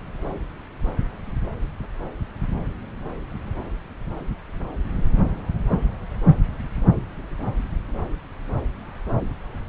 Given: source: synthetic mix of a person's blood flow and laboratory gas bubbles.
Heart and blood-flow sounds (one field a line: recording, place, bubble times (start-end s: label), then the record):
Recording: Doppler ultrasound of blood flow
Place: subclavian vein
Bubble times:
no bubbles
From the record:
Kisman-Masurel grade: 000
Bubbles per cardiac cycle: 0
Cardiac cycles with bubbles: 0%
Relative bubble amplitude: no bubbles discernible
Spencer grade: 0 (complete lack of bubble signals)